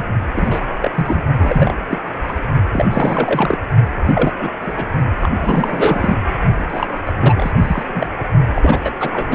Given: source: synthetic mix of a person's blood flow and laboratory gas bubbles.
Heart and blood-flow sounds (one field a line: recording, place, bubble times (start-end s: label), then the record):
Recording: Doppler ultrasound of blood flow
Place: precordium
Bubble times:
0.00-0.04 s: bubbles
0.34-0.62 s: bubbles
0.82-0.91 s: bubbles
0.96-1.24 s: bubbles
1.39-1.73 s: bubbles
1.89-1.98 s: bubbles
2.27-2.32 s: bubbles
2.73-2.87 s: bubbles
2.90-3.58 s: bubbles
4.08-4.33 s: bubbles
4.39-4.49 s: bubbles
4.61-4.72 s: bubbles
4.76-4.85 s: bubbles
5.21-5.29 s: bubbles
5.34-6.19 s: bubbles
6.58-6.63 s: bubbles
6.68-6.87 s: bubbles
7.05-7.13 s: bubbles
7.22-7.52 s: bubbles
7.59-8.09 s: bubbles
8.54-8.79 s: bubbles
8.84-8.90 s: bubbles
8.99-9.35 s: bubbles
From the record:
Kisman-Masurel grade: 342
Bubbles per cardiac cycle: rolling drumbeat, 9 or more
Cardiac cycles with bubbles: 100%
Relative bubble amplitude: moderate (0.250 to 0.450)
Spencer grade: 3 (all of the cardiac periods contain showers or single bubble signals, but not dominating or overriding the cardiac motion signals)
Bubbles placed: only in the low amplitude regions of the cardiac cycle